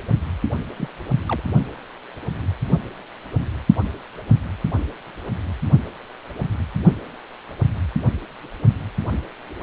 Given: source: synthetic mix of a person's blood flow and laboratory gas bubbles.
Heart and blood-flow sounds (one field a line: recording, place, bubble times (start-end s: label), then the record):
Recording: Doppler ultrasound of blood flow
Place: precordium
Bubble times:
0.77-0.89 s: bubbles
1.28-1.43 s: bubbles
From the record:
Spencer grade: 2 (many but less than half of the cardiac periods contain bubble signals, singularly or in groups)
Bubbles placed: only in the low amplitude regions of the cardiac cycle